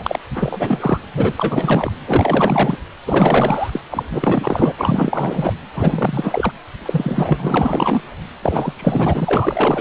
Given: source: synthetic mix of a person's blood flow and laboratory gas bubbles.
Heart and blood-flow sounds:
Doppler ultrasound of blood flow; precordium
0.00-0.19 s: bubbles
0.34-0.98 s: bubbles
1.14-1.33 s: bubbles
1.36-1.92 s: bubbles
2.08-2.78 s: bubbles
3.06-3.81 s: bubbles
3.91-4.03 s: bubbles
4.10-4.73 s: bubbles
4.76-5.53 s: bubbles
5.73-6.53 s: bubbles
6.85-8.02 s: bubbles
8.42-8.73 s: bubbles
8.76-9.81 s: bubbles
From the record:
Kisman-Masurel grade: 444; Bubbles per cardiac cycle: continuous sound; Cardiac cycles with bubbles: 100%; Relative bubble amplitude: maximal (0.775 to 0.999); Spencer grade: 4 (maximum detectable bubble signal sounding continuously throughout systole and diastole of every cardiac period, and overriding the amplitude of the normal cardiac signals); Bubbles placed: anywhere in the cardiac cycle

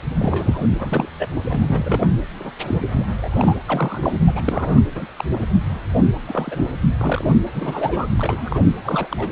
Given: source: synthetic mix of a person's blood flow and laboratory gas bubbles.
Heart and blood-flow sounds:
Doppler ultrasound of blood flow; precordium
0.00-0.02 s: bubbles
0.20-0.68 s: bubbles
0.79-1.08 s: bubbles
1.19-1.27 s: bubbles
1.48-2.15 s: bubbles
2.38-2.52 s: bubbles
2.68-2.80 s: bubbles
2.95-3.06 s: bubbles
3.15-3.55 s: bubbles
3.65-4.23 s: bubbles
4.26-4.80 s: bubbles
4.95-5.07 s: bubbles
5.18-5.25 s: bubbles
5.33-5.46 s: bubbles
6.26-6.70 s: bubbles
7.00-7.30 s: bubbles
7.54-8.06 s: bubbles
8.17-8.64 s: bubbles
8.84-9.07 s: bubbles
9.10-9.28 s: bubbles
From the record:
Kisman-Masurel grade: 232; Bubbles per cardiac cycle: several, 3 to 8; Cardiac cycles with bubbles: 50 to 99%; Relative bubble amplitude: moderate (0.250 to 0.450); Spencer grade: 3 (all of the cardiac periods contain showers or single bubble signals, but not dominating or overriding the cardiac motion signals); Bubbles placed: anywhere in the cardiac cycle

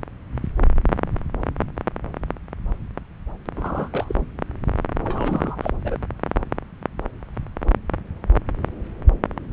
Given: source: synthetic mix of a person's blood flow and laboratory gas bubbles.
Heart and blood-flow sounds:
Doppler ultrasound of blood flow; subclavian vein
3.57-4.15 s: bubbles
5.01-5.71 s: bubbles
5.85-5.96 s: bubbles
From the record:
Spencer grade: 1 (occasional bubble signal discernible with the cardiac motion signal, with majority of cardiac periods free of bubbles); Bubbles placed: anywhere in the cardiac cycle

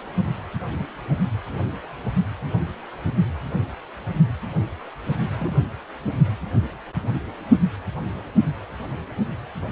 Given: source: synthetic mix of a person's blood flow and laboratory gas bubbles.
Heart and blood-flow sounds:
Doppler ultrasound of blood flow; precordium
5.38-5.64 s: bubbles
From the record:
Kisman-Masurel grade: 111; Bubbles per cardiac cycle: 1 to 2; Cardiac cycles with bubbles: 1 to 10%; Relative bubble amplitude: barely perceptible (0.100 to 0.250); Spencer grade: 1 (occasional bubble signal discernible with the cardiac motion signal, with majority of cardiac periods free of bubbles); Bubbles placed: only in the low amplitude regions of the cardiac cycle

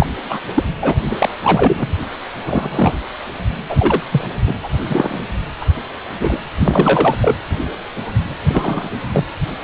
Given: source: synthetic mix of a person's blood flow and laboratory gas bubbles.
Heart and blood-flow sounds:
Doppler ultrasound of blood flow; precordium
0.00-0.07 s: bubbles
0.29-0.41 s: bubbles
0.54-0.64 s: bubbles
0.82-0.95 s: bubbles
1.05-1.29 s: bubbles
1.43-1.94 s: bubbles
2.45-2.94 s: bubbles
3.69-4.01 s: bubbles
4.12-4.28 s: bubbles
4.47-4.54 s: bubbles
4.62-4.69 s: bubbles
4.89-5.22 s: bubbles
5.60-5.66 s: bubbles
6.19-6.41 s: bubbles
6.60-7.16 s: bubbles
7.21-7.36 s: bubbles
8.49-8.91 s: bubbles
9.12-9.25 s: bubbles
From the record:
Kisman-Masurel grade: 233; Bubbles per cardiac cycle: several, 3 to 8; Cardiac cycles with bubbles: 50 to 99%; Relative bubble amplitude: loud (0.450 to 0.775); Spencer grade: 3 (all of the cardiac periods contain showers or single bubble signals, but not dominating or overriding the cardiac motion signals); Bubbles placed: anywhere in the cardiac cycle

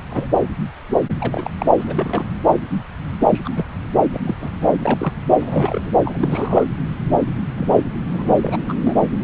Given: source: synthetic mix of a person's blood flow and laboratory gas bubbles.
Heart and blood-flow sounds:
Doppler ultrasound of blood flow; subclavian vein
0.09-0.29 s: bubbles
1.20-1.50 s: bubbles
1.58-1.66 s: bubbles
1.80-2.25 s: bubbles
3.30-3.42 s: bubbles
3.44-3.65 s: bubbles
4.13-4.21 s: bubbles
4.25-4.34 s: bubbles
4.40-4.50 s: bubbles
4.61-4.76 s: bubbles
4.82-5.12 s: bubbles
5.42-5.92 s: bubbles
6.04-6.63 s: bubbles
7.57-7.84 s: bubbles
8.12-8.36 s: bubbles
8.41-8.73 s: bubbles
8.79-8.95 s: bubbles
From the record:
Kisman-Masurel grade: 232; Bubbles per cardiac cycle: several, 3 to 8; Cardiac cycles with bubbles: 50 to 99%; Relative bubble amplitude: moderate (0.250 to 0.450); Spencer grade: 3 (all of the cardiac periods contain showers or single bubble signals, but not dominating or overriding the cardiac motion signals); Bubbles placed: anywhere in the cardiac cycle

